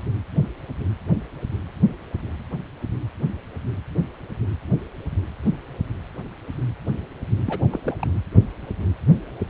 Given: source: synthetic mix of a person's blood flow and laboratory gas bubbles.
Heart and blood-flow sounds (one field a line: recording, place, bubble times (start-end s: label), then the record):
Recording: Doppler ultrasound of blood flow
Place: precordium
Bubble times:
7.46-7.67 s: bubbles
7.71-7.79 s: bubbles
7.84-7.96 s: bubbles
7.99-8.07 s: bubbles
From the record:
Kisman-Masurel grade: 211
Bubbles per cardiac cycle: several, 3 to 8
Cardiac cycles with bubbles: 1 to 10%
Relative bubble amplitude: barely perceptible (0.100 to 0.250)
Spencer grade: 1 (occasional bubble signal discernible with the cardiac motion signal, with majority of cardiac periods free of bubbles)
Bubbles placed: anywhere in the cardiac cycle